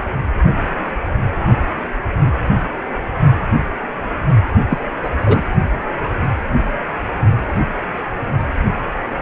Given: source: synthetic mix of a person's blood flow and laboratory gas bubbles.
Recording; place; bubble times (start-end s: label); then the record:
Doppler ultrasound of blood flow; precordium
4.68-4.78 s: bubbles
5.01-5.10 s: bubbles
5.26-5.44 s: bubbles
From the record:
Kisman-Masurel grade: 213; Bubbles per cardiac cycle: several, 3 to 8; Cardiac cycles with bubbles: 1 to 10%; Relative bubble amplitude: loud (0.450 to 0.775); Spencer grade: 1 (occasional bubble signal discernible with the cardiac motion signal, with majority of cardiac periods free of bubbles); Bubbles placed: only in the low amplitude regions of the cardiac cycle